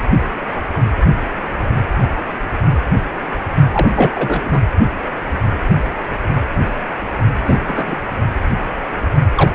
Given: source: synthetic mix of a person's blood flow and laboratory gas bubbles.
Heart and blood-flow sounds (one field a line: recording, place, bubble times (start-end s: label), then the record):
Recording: Doppler ultrasound of blood flow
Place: precordium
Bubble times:
3.72-3.90 s: bubbles
3.92-4.61 s: bubbles
7.46-7.96 s: bubbles
9.36-9.51 s: bubbles
From the record:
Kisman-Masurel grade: 223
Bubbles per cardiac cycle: several, 3 to 8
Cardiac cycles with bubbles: 10 to 50%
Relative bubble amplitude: loud (0.450 to 0.775)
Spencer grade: 2 (many but less than half of the cardiac periods contain bubble signals, singularly or in groups)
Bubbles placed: only in the low amplitude regions of the cardiac cycle